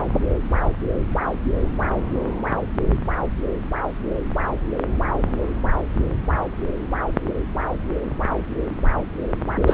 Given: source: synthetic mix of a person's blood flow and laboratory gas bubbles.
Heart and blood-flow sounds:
Doppler ultrasound of blood flow; subclavian vein
9.66-9.73 s: bubbles
From the record:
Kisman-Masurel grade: 213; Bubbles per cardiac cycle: several, 3 to 8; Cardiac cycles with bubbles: 1 to 10%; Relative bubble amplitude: loud (0.450 to 0.775); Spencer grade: 1 (occasional bubble signal discernible with the cardiac motion signal, with majority of cardiac periods free of bubbles); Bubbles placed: anywhere in the cardiac cycle

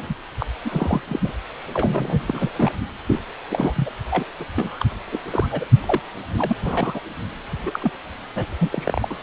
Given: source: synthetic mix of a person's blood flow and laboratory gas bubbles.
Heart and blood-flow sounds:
Doppler ultrasound of blood flow; precordium
0.00-0.15 s: bubbles
0.40-0.46 s: bubbles
0.65-1.01 s: bubbles
1.07-1.20 s: bubbles
1.23-1.32 s: bubbles
1.74-2.21 s: bubbles
2.27-2.52 s: bubbles
2.56-2.72 s: bubbles
3.07-3.20 s: bubbles
3.50-3.90 s: bubbles
4.11-4.24 s: bubbles
4.40-4.45 s: bubbles
4.55-4.85 s: bubbles
5.12-5.19 s: bubbles
5.31-5.46 s: bubbles
5.51-5.65 s: bubbles
5.82-6.00 s: bubbles
6.38-6.56 s: bubbles
6.63-7.01 s: bubbles
7.63-7.79 s: bubbles
7.81-7.92 s: bubbles
8.35-8.45 s: bubbles
8.59-9.17 s: bubbles
From the record:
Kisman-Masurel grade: 232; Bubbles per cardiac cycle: several, 3 to 8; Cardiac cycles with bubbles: 50 to 99%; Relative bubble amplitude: moderate (0.250 to 0.450); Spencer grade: 3 (all of the cardiac periods contain showers or single bubble signals, but not dominating or overriding the cardiac motion signals); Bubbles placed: anywhere in the cardiac cycle

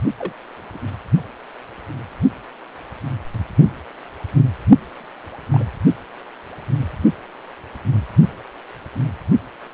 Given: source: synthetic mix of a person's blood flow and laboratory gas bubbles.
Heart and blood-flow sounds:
Doppler ultrasound of blood flow; precordium
0.18-0.32 s: bubbles
0.74-0.78 s: bubbles
5.52-5.65 s: bubbles
From the record:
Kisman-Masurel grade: 121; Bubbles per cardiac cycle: 1 to 2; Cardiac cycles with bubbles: 10 to 50%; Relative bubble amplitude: barely perceptible (0.100 to 0.250); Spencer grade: 2 (many but less than half of the cardiac periods contain bubble signals, singularly or in groups); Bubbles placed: only in the low amplitude regions of the cardiac cycle

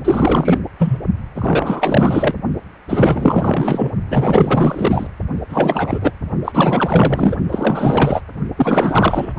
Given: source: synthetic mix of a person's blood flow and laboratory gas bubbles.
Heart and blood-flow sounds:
Doppler ultrasound of blood flow; precordium
0.05-0.59 s: bubbles
0.79-0.98 s: bubbles
1.35-2.34 s: bubbles
2.88-3.90 s: bubbles
4.10-5.07 s: bubbles
5.49-6.11 s: bubbles
6.44-7.36 s: bubbles
7.49-8.21 s: bubbles
8.56-9.33 s: bubbles
From the record:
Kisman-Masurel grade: 444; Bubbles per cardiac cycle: continuous sound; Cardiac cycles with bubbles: 100%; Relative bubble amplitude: maximal (0.775 to 0.999); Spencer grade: 4 (maximum detectable bubble signal sounding continuously throughout systole and diastole of every cardiac period, and overriding the amplitude of the normal cardiac signals); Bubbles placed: only in the low amplitude regions of the cardiac cycle

